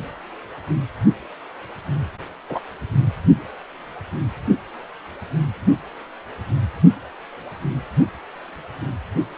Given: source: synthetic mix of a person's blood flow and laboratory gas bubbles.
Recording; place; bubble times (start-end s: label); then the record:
Doppler ultrasound of blood flow; precordium
2.49-2.59 s: bubbles
From the record:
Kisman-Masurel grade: 123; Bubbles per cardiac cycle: 1 to 2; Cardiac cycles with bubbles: 10 to 50%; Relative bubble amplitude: loud (0.450 to 0.775); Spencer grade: 2 (many but less than half of the cardiac periods contain bubble signals, singularly or in groups); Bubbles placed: only in the low amplitude regions of the cardiac cycle